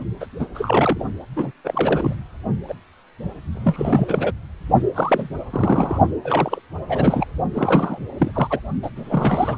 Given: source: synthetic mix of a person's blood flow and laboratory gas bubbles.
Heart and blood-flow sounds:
Doppler ultrasound of blood flow; precordium
0.20-0.27 s: bubbles
0.39-0.46 s: bubbles
0.54-1.04 s: bubbles
1.36-1.51 s: bubbles
1.65-2.15 s: bubbles
2.69-2.73 s: bubbles
3.52-4.33 s: bubbles
4.94-5.29 s: bubbles
5.50-5.99 s: bubbles
6.23-6.60 s: bubbles
6.88-7.26 s: bubbles
7.53-7.99 s: bubbles
8.18-8.60 s: bubbles
8.82-8.90 s: bubbles
8.96-9.58 s: bubbles
From the record:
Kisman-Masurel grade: 342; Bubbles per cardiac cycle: rolling drumbeat, 9 or more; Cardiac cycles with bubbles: 100%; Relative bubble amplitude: moderate (0.250 to 0.450); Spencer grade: 3 (all of the cardiac periods contain showers or single bubble signals, but not dominating or overriding the cardiac motion signals); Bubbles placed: only in the low amplitude regions of the cardiac cycle

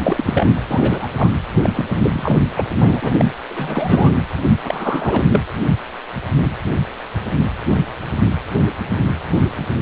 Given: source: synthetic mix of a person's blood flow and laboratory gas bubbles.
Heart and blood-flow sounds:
Doppler ultrasound of blood flow; precordium
0.03-0.56 s: bubbles
0.70-1.08 s: bubbles
1.16-1.31 s: bubbles
1.60-1.85 s: bubbles
2.02-2.43 s: bubbles
2.55-2.63 s: bubbles
2.81-3.32 s: bubbles
3.50-4.12 s: bubbles
4.65-5.24 s: bubbles
5.33-5.41 s: bubbles
From the record:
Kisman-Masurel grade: 333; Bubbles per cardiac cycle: rolling drumbeat, 9 or more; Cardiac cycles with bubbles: 50 to 99%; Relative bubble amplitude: loud (0.450 to 0.775); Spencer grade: 3 (all of the cardiac periods contain showers or single bubble signals, but not dominating or overriding the cardiac motion signals); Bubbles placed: anywhere in the cardiac cycle

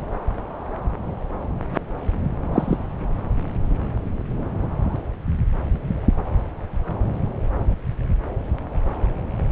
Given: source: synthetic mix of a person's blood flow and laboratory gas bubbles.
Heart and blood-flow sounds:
Doppler ultrasound of blood flow; subclavian vein
2.53-2.77 s: bubbles
From the record:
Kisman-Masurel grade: 113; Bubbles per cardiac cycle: 1 to 2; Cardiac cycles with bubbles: 1 to 10%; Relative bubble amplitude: loud (0.450 to 0.775); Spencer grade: 1 (occasional bubble signal discernible with the cardiac motion signal, with majority of cardiac periods free of bubbles); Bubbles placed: anywhere in the cardiac cycle

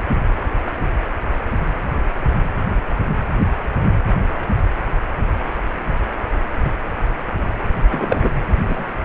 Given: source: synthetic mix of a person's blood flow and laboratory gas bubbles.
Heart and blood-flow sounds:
Doppler ultrasound of blood flow; precordium
6.64-6.72 s: bubbles
7.90-8.30 s: bubbles
8.68-8.83 s: bubbles
From the record:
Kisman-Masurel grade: 123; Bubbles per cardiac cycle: 1 to 2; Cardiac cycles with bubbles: 10 to 50%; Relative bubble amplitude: loud (0.450 to 0.775); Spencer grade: 2 (many but less than half of the cardiac periods contain bubble signals, singularly or in groups); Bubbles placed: anywhere in the cardiac cycle

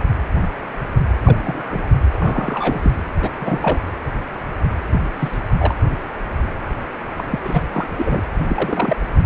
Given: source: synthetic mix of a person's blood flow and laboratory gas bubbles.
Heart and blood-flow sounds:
Doppler ultrasound of blood flow; precordium
0.00-0.05 s: bubbles
1.23-1.92 s: bubbles
2.14-2.92 s: bubbles
3.21-3.29 s: bubbles
3.40-3.79 s: bubbles
4.87-5.02 s: bubbles
5.16-5.39 s: bubbles
5.59-5.75 s: bubbles
7.16-7.24 s: bubbles
7.30-7.38 s: bubbles
7.43-7.63 s: bubbles
7.71-7.88 s: bubbles
7.97-8.23 s: bubbles
8.39-8.96 s: bubbles
From the record:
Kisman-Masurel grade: 232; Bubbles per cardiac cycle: several, 3 to 8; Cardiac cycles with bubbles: 50 to 99%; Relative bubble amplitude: moderate (0.250 to 0.450); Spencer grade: 3 (all of the cardiac periods contain showers or single bubble signals, but not dominating or overriding the cardiac motion signals); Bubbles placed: anywhere in the cardiac cycle

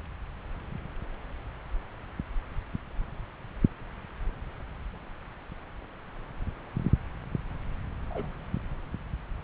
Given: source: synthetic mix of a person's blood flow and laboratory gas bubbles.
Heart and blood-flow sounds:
Doppler ultrasound of blood flow; subclavian vein
8.10-8.28 s: bubbles
From the record:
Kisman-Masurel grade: 111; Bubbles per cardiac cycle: 1 to 2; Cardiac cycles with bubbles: 1 to 10%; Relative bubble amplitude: barely perceptible (0.100 to 0.250); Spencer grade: 1 (occasional bubble signal discernible with the cardiac motion signal, with majority of cardiac periods free of bubbles); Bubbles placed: anywhere in the cardiac cycle

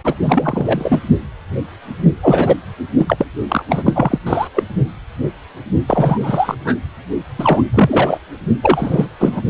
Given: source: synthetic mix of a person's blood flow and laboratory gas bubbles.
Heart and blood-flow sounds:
Doppler ultrasound of blood flow; precordium
0.04-0.15 s: bubbles
0.21-1.00 s: bubbles
2.23-2.56 s: bubbles
2.98-3.26 s: bubbles
3.48-3.63 s: bubbles
3.69-4.18 s: bubbles
4.26-4.47 s: bubbles
4.54-4.63 s: bubbles
5.87-6.55 s: bubbles
6.64-6.75 s: bubbles
7.38-7.62 s: bubbles
7.74-8.19 s: bubbles
8.62-9.09 s: bubbles
9.19-9.42 s: bubbles
From the record:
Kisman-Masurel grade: 333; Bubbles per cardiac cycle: rolling drumbeat, 9 or more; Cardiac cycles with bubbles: 50 to 99%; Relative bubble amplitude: loud (0.450 to 0.775); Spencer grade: 3 (all of the cardiac periods contain showers or single bubble signals, but not dominating or overriding the cardiac motion signals); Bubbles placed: only in the low amplitude regions of the cardiac cycle

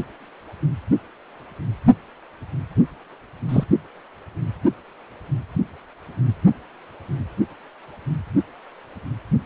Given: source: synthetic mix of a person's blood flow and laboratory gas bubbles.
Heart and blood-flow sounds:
Doppler ultrasound of blood flow; precordium
3.48-3.64 s: bubbles
From the record:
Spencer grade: 1 (occasional bubble signal discernible with the cardiac motion signal, with majority of cardiac periods free of bubbles); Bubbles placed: only in the low amplitude regions of the cardiac cycle

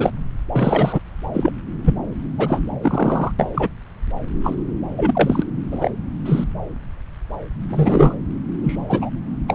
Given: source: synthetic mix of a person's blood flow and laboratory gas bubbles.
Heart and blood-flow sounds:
Doppler ultrasound of blood flow; subclavian vein
0.00-0.10 s: bubbles
0.52-1.00 s: bubbles
1.33-1.53 s: bubbles
1.84-1.95 s: bubbles
2.38-2.61 s: bubbles
2.82-3.31 s: bubbles
3.39-3.69 s: bubbles
4.43-4.55 s: bubbles
4.96-5.43 s: bubbles
5.71-5.91 s: bubbles
6.25-6.44 s: bubbles
7.69-8.15 s: bubbles
8.64-8.79 s: bubbles
8.89-9.10 s: bubbles
9.47-9.55 s: bubbles
From the record:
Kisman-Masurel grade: 233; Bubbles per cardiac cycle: several, 3 to 8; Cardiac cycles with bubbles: 50 to 99%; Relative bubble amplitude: loud (0.450 to 0.775); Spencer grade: 3 (all of the cardiac periods contain showers or single bubble signals, but not dominating or overriding the cardiac motion signals); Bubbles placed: anywhere in the cardiac cycle

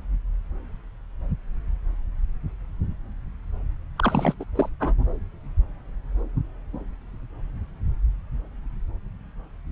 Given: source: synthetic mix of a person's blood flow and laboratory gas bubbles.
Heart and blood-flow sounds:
Doppler ultrasound of blood flow; subclavian vein
3.97-4.34 s: bubbles
4.40-4.45 s: bubbles
4.56-4.69 s: bubbles
4.79-4.94 s: bubbles
From the record:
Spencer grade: 1 (occasional bubble signal discernible with the cardiac motion signal, with majority of cardiac periods free of bubbles); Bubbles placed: anywhere in the cardiac cycle

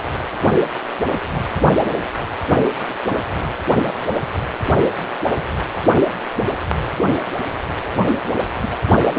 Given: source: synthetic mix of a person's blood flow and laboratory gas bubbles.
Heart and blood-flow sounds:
Doppler ultrasound of blood flow; precordium
6.90-7.07 s: bubbles
8.40-8.44 s: bubbles
8.61-8.69 s: bubbles
From the record:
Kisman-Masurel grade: 121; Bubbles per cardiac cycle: 1 to 2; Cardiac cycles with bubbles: 10 to 50%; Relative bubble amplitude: barely perceptible (0.100 to 0.250); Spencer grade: 2 (many but less than half of the cardiac periods contain bubble signals, singularly or in groups); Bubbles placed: anywhere in the cardiac cycle

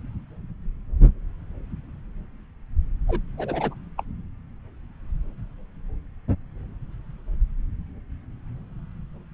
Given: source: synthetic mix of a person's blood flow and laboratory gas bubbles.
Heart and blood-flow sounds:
Doppler ultrasound of blood flow; subclavian vein
3.07-3.21 s: bubbles
3.38-3.75 s: bubbles
3.98-4.03 s: bubbles
From the record:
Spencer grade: 1 (occasional bubble signal discernible with the cardiac motion signal, with majority of cardiac periods free of bubbles); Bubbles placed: anywhere in the cardiac cycle

